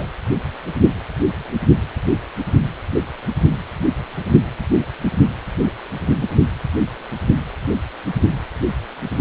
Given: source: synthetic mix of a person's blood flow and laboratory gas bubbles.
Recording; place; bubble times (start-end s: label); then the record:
Doppler ultrasound of blood flow; precordium
0.00-0.05 s: bubbles
From the record:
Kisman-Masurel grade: 213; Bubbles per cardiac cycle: several, 3 to 8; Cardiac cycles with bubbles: 1 to 10%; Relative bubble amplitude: loud (0.450 to 0.775); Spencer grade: 1 (occasional bubble signal discernible with the cardiac motion signal, with majority of cardiac periods free of bubbles); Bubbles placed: anywhere in the cardiac cycle